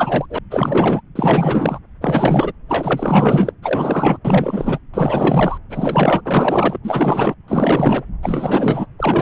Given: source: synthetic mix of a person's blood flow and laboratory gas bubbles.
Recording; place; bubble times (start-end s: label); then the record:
Doppler ultrasound of blood flow; subclavian vein
0.00-0.26 s: bubbles
0.29-0.39 s: bubbles
0.50-1.01 s: bubbles
1.15-1.79 s: bubbles
2.01-2.52 s: bubbles
2.69-3.52 s: bubbles
3.62-4.18 s: bubbles
4.25-4.79 s: bubbles
4.93-5.58 s: bubbles
5.70-6.21 s: bubbles
6.25-6.79 s: bubbles
6.83-7.35 s: bubbles
7.48-8.04 s: bubbles
8.22-8.87 s: bubbles
8.98-9.22 s: bubbles
From the record:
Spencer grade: 4 (maximum detectable bubble signal sounding continuously throughout systole and diastole of every cardiac period, and overriding the amplitude of the normal cardiac signals); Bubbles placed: anywhere in the cardiac cycle